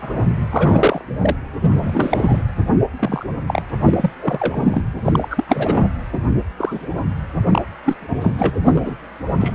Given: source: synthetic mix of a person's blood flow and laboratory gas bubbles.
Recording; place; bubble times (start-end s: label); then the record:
Doppler ultrasound of blood flow; precordium
0.01-0.29 s: bubbles
0.49-1.02 s: bubbles
1.21-1.35 s: bubbles
1.61-2.44 s: bubbles
2.99-3.26 s: bubbles
3.48-3.62 s: bubbles
3.84-4.10 s: bubbles
4.21-4.81 s: bubbles
5.04-5.44 s: bubbles
5.48-5.86 s: bubbles
6.12-6.21 s: bubbles
6.58-7.04 s: bubbles
7.50-7.62 s: bubbles
7.84-7.95 s: bubbles
8.00-8.56 s: bubbles
8.63-8.96 s: bubbles
9.40-9.54 s: bubbles
From the record:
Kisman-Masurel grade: 243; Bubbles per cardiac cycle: several, 3 to 8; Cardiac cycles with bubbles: 100%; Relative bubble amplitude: loud (0.450 to 0.775); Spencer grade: 3 (all of the cardiac periods contain showers or single bubble signals, but not dominating or overriding the cardiac motion signals); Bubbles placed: anywhere in the cardiac cycle